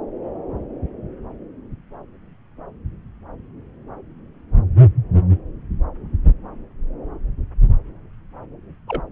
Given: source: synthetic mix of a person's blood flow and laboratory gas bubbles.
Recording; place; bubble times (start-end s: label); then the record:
Doppler ultrasound of blood flow; subclavian vein
8.88-9.03 s: bubbles
From the record:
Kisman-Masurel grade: 111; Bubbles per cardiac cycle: 1 to 2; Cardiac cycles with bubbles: 1 to 10%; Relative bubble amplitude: barely perceptible (0.100 to 0.250); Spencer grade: 1 (occasional bubble signal discernible with the cardiac motion signal, with majority of cardiac periods free of bubbles); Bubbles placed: anywhere in the cardiac cycle